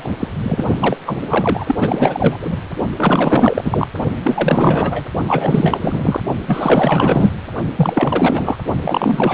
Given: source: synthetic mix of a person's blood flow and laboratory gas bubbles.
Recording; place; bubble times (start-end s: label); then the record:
Doppler ultrasound of blood flow; precordium
0.00-0.11 s: bubbles
0.19-0.28 s: bubbles
0.43-0.65 s: bubbles
0.79-0.97 s: bubbles
1.05-1.19 s: bubbles
1.28-1.75 s: bubbles
1.81-2.38 s: bubbles
2.41-2.57 s: bubbles
2.97-3.87 s: bubbles
4.23-5.03 s: bubbles
5.28-6.20 s: bubbles
6.46-7.31 s: bubbles
7.75-8.58 s: bubbles
8.81-9.34 s: bubbles
From the record:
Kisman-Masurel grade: 444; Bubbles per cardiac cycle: continuous sound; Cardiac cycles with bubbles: 100%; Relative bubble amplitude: maximal (0.775 to 0.999); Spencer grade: 4 (maximum detectable bubble signal sounding continuously throughout systole and diastole of every cardiac period, and overriding the amplitude of the normal cardiac signals); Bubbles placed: only in the low amplitude regions of the cardiac cycle